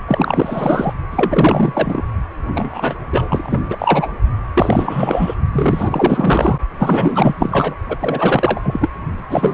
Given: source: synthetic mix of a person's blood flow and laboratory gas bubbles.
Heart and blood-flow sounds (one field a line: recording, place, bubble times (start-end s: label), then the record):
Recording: Doppler ultrasound of blood flow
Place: precordium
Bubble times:
0.07-0.94 s: bubbles
1.11-2.02 s: bubbles
2.54-2.95 s: bubbles
3.12-3.61 s: bubbles
3.70-4.08 s: bubbles
4.54-5.34 s: bubbles
5.52-6.58 s: bubbles
6.79-7.75 s: bubbles
7.89-8.89 s: bubbles
9.29-9.54 s: bubbles
From the record:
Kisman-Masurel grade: 444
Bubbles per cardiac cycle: continuous sound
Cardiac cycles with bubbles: 100%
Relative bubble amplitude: maximal (0.775 to 0.999)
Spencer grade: 4 (maximum detectable bubble signal sounding continuously throughout systole and diastole of every cardiac period, and overriding the amplitude of the normal cardiac signals)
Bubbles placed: only in the low amplitude regions of the cardiac cycle